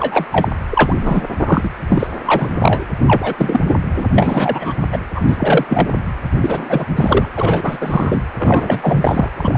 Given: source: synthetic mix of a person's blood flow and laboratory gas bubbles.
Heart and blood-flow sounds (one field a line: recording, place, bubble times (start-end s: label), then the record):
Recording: Doppler ultrasound of blood flow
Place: precordium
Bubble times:
0.00-0.25 s: bubbles
0.31-0.48 s: bubbles
0.70-1.25 s: bubbles
1.38-1.70 s: bubbles
1.89-2.07 s: bubbles
2.26-2.87 s: bubbles
3.06-3.35 s: bubbles
3.38-3.60 s: bubbles
3.65-3.73 s: bubbles
3.95-4.05 s: bubbles
4.13-4.73 s: bubbles
4.92-4.97 s: bubbles
5.15-5.22 s: bubbles
5.27-5.65 s: bubbles
5.68-5.91 s: bubbles
6.41-6.86 s: bubbles
6.96-7.29 s: bubbles
7.36-7.78 s: bubbles
7.80-8.24 s: bubbles
8.38-9.29 s: bubbles
9.38-9.58 s: bubbles
From the record:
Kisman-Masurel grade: 343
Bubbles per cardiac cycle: rolling drumbeat, 9 or more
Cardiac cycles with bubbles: 100%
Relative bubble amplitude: loud (0.450 to 0.775)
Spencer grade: 3 (all of the cardiac periods contain showers or single bubble signals, but not dominating or overriding the cardiac motion signals)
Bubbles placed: anywhere in the cardiac cycle